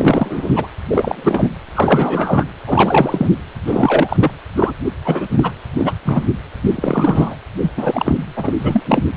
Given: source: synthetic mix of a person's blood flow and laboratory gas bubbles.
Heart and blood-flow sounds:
Doppler ultrasound of blood flow; precordium
0.00-0.67 s: bubbles
0.88-1.51 s: bubbles
1.75-2.44 s: bubbles
2.65-3.30 s: bubbles
3.66-4.16 s: bubbles
4.19-4.31 s: bubbles
4.55-4.72 s: bubbles
5.04-5.26 s: bubbles
5.31-5.52 s: bubbles
5.73-5.95 s: bubbles
6.04-6.22 s: bubbles
6.62-7.37 s: bubbles
7.62-7.72 s: bubbles
7.76-8.16 s: bubbles
8.36-8.54 s: bubbles
8.58-9.03 s: bubbles
From the record:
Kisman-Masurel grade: 343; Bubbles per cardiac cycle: rolling drumbeat, 9 or more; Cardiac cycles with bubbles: 100%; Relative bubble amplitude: loud (0.450 to 0.775); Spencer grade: 3 (all of the cardiac periods contain showers or single bubble signals, but not dominating or overriding the cardiac motion signals); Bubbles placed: anywhere in the cardiac cycle

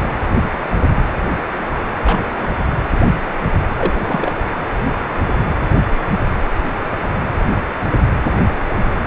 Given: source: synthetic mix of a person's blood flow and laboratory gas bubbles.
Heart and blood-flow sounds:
Doppler ultrasound of blood flow; precordium
2.05-2.33 s: bubbles
2.42-2.50 s: bubbles
3.77-3.92 s: bubbles
4.04-4.32 s: bubbles
From the record:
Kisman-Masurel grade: 222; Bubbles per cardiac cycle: several, 3 to 8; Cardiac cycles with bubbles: 10 to 50%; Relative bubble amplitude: moderate (0.250 to 0.450); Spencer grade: 2 (many but less than half of the cardiac periods contain bubble signals, singularly or in groups); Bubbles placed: anywhere in the cardiac cycle

